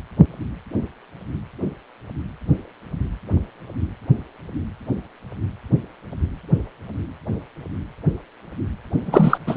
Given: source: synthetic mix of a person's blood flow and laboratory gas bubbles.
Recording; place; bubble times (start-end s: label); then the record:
Doppler ultrasound of blood flow; precordium
9.05-9.38 s: bubbles
9.46-9.57 s: bubbles
From the record:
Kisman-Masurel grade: 213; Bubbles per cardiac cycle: several, 3 to 8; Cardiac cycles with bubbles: 1 to 10%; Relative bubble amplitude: loud (0.450 to 0.775); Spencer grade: 1 (occasional bubble signal discernible with the cardiac motion signal, with majority of cardiac periods free of bubbles); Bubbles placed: anywhere in the cardiac cycle